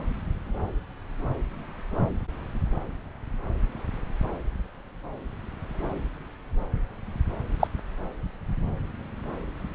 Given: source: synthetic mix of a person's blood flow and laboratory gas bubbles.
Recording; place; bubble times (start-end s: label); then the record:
Doppler ultrasound of blood flow; subclavian vein
7.59-7.67 s: bubbles
From the record:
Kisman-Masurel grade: 112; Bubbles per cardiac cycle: 1 to 2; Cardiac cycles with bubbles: 1 to 10%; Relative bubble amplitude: moderate (0.250 to 0.450); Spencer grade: 1 (occasional bubble signal discernible with the cardiac motion signal, with majority of cardiac periods free of bubbles); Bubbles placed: anywhere in the cardiac cycle